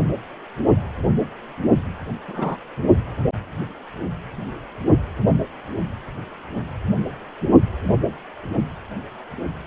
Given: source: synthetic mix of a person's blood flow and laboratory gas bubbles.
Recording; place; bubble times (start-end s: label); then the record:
Doppler ultrasound of blood flow; precordium
2.28-2.57 s: bubbles
From the record:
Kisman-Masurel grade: 122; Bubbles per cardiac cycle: 1 to 2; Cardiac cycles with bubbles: 10 to 50%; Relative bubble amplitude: moderate (0.250 to 0.450); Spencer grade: 2 (many but less than half of the cardiac periods contain bubble signals, singularly or in groups); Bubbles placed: anywhere in the cardiac cycle